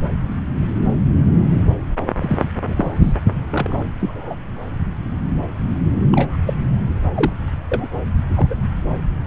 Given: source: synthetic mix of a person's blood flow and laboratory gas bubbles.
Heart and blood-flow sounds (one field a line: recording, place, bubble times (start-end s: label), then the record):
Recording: Doppler ultrasound of blood flow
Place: subclavian vein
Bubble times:
2.16-2.44 s: bubbles
2.67-3.16 s: bubbles
3.50-3.83 s: bubbles
4.00-4.35 s: bubbles
6.12-6.37 s: bubbles
6.46-6.54 s: bubbles
7.14-7.33 s: bubbles
7.71-7.87 s: bubbles
8.37-8.47 s: bubbles
8.50-8.55 s: bubbles
From the record:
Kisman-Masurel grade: 122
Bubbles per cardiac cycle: 1 to 2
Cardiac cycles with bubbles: 10 to 50%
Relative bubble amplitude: moderate (0.250 to 0.450)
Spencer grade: 2 (many but less than half of the cardiac periods contain bubble signals, singularly or in groups)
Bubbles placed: anywhere in the cardiac cycle